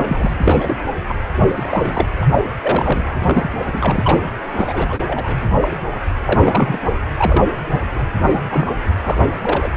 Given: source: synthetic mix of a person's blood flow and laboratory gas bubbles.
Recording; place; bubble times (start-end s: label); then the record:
Doppler ultrasound of blood flow; precordium
0.00-0.30 s: bubbles
0.40-0.76 s: bubbles
1.08-1.15 s: bubbles
1.35-1.53 s: bubbles
1.56-2.08 s: bubbles
2.21-2.25 s: bubbles
2.61-3.04 s: bubbles
3.23-3.60 s: bubbles
3.66-4.20 s: bubbles
4.57-5.00 s: bubbles
5.07-5.38 s: bubbles
5.62-5.68 s: bubbles
5.71-5.76 s: bubbles
6.25-6.79 s: bubbles
7.17-7.45 s: bubbles
7.58-7.80 s: bubbles
7.95-8.01 s: bubbles
8.31-8.44 s: bubbles
8.49-8.67 s: bubbles
9.03-9.18 s: bubbles
9.40-9.72 s: bubbles
From the record:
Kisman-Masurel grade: 242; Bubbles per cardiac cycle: several, 3 to 8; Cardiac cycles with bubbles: 100%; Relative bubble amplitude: moderate (0.250 to 0.450); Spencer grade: 3 (all of the cardiac periods contain showers or single bubble signals, but not dominating or overriding the cardiac motion signals); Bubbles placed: anywhere in the cardiac cycle